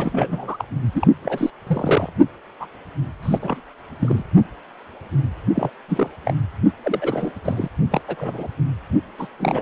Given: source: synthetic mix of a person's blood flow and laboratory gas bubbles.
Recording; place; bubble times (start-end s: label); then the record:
Doppler ultrasound of blood flow; precordium
0.00-0.65 s: bubbles
0.92-1.07 s: bubbles
1.23-1.50 s: bubbles
1.66-2.09 s: bubbles
2.60-2.67 s: bubbles
3.23-3.38 s: bubbles
3.42-3.60 s: bubbles
4.00-4.23 s: bubbles
5.54-5.71 s: bubbles
5.88-6.10 s: bubbles
6.25-6.35 s: bubbles
6.83-7.32 s: bubbles
7.44-7.68 s: bubbles
7.91-8.01 s: bubbles
8.08-8.47 s: bubbles
9.19-9.28 s: bubbles
9.39-9.62 s: bubbles
From the record:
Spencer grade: 3 (all of the cardiac periods contain showers or single bubble signals, but not dominating or overriding the cardiac motion signals); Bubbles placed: only in the low amplitude regions of the cardiac cycle